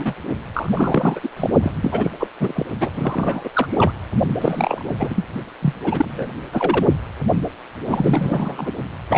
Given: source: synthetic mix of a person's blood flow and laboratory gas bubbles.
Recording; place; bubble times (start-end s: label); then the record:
Doppler ultrasound of blood flow; precordium
0.00-0.14 s: bubbles
0.54-0.71 s: bubbles
0.74-1.20 s: bubbles
1.23-1.29 s: bubbles
1.36-1.50 s: bubbles
1.62-1.71 s: bubbles
1.81-2.11 s: bubbles
2.19-2.27 s: bubbles
2.40-2.67 s: bubbles
2.80-2.90 s: bubbles
2.94-3.49 s: bubbles
3.53-4.00 s: bubbles
4.41-4.95 s: bubbles
4.99-5.25 s: bubbles
5.62-5.74 s: bubbles
5.84-6.27 s: bubbles
6.53-6.87 s: bubbles
7.87-8.72 s: bubbles
9.10-9.18 s: bubbles
From the record:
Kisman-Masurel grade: 333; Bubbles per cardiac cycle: rolling drumbeat, 9 or more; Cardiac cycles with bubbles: 50 to 99%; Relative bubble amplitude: loud (0.450 to 0.775); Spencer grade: 3 (all of the cardiac periods contain showers or single bubble signals, but not dominating or overriding the cardiac motion signals); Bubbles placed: only in the low amplitude regions of the cardiac cycle